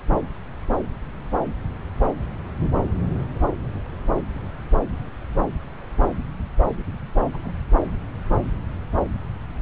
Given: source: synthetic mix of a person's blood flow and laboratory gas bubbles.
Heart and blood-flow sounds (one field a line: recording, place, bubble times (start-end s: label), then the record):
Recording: Doppler ultrasound of blood flow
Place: subclavian vein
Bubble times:
7.33-7.54 s: bubbles
From the record:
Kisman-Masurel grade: 111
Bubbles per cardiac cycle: 1 to 2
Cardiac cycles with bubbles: 1 to 10%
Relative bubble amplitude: barely perceptible (0.100 to 0.250)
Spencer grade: 1 (occasional bubble signal discernible with the cardiac motion signal, with majority of cardiac periods free of bubbles)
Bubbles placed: anywhere in the cardiac cycle